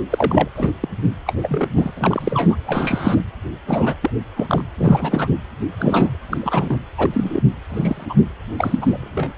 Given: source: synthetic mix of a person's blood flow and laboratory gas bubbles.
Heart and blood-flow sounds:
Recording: Doppler ultrasound of blood flow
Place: precordium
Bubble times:
0.10-0.48 s: bubbles
0.56-0.70 s: bubbles
0.81-0.89 s: bubbles
1.26-1.33 s: bubbles
1.42-1.68 s: bubbles
1.76-1.91 s: bubbles
1.95-2.56 s: bubbles
2.66-3.25 s: bubbles
3.67-3.94 s: bubbles
4.02-4.10 s: bubbles
4.36-4.63 s: bubbles
4.77-5.27 s: bubbles
5.77-6.17 s: bubbles
6.29-6.77 s: bubbles
6.97-7.41 s: bubbles
7.69-8.05 s: bubbles
8.09-8.14 s: bubbles
8.57-8.79 s: bubbles
8.81-9.31 s: bubbles
From the record:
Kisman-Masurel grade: 243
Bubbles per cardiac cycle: several, 3 to 8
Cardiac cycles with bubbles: 100%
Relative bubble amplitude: loud (0.450 to 0.775)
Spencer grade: 3 (all of the cardiac periods contain showers or single bubble signals, but not dominating or overriding the cardiac motion signals)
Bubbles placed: anywhere in the cardiac cycle

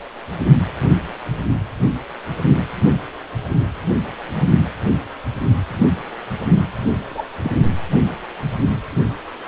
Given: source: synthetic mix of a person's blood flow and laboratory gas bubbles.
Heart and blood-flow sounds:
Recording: Doppler ultrasound of blood flow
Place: precordium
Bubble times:
7.09-7.24 s: bubbles
7.44-7.51 s: bubbles
From the record:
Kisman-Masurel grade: 112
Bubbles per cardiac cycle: 1 to 2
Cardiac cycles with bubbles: 1 to 10%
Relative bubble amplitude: moderate (0.250 to 0.450)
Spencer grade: 1 (occasional bubble signal discernible with the cardiac motion signal, with majority of cardiac periods free of bubbles)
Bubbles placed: anywhere in the cardiac cycle

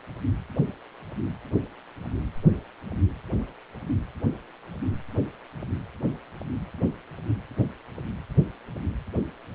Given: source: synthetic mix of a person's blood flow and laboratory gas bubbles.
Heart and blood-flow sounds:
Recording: Doppler ultrasound of blood flow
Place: precordium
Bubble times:
no bubbles
From the record:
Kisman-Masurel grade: 000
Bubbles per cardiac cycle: 0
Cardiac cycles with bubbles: 0%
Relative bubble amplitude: no bubbles discernible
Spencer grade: 0 (complete lack of bubble signals)

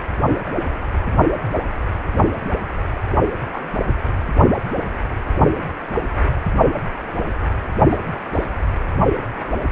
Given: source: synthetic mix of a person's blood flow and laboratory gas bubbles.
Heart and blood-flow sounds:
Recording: Doppler ultrasound of blood flow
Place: precordium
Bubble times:
3.53-3.59 s: bubbles
7.89-7.98 s: bubbles
8.32-8.48 s: bubbles
From the record:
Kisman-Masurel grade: 121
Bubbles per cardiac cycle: 1 to 2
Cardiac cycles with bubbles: 10 to 50%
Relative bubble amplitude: barely perceptible (0.100 to 0.250)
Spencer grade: 2 (many but less than half of the cardiac periods contain bubble signals, singularly or in groups)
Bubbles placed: only in the low amplitude regions of the cardiac cycle

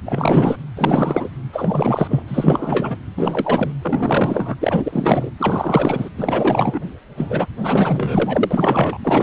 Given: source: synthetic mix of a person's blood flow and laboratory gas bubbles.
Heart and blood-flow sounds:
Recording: Doppler ultrasound of blood flow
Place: precordium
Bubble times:
0.04-0.56 s: bubbles
0.76-1.30 s: bubbles
1.52-2.23 s: bubbles
2.27-2.98 s: bubbles
3.17-3.73 s: bubbles
3.81-4.55 s: bubbles
4.60-5.30 s: bubbles
5.39-6.09 s: bubbles
6.17-6.80 s: bubbles
7.17-7.47 s: bubbles
7.61-8.98 s: bubbles
9.04-9.23 s: bubbles
From the record:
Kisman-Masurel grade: 444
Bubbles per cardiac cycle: continuous sound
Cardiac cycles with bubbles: 100%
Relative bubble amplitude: maximal (0.775 to 0.999)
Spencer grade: 4 (maximum detectable bubble signal sounding continuously throughout systole and diastole of every cardiac period, and overriding the amplitude of the normal cardiac signals)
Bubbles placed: anywhere in the cardiac cycle

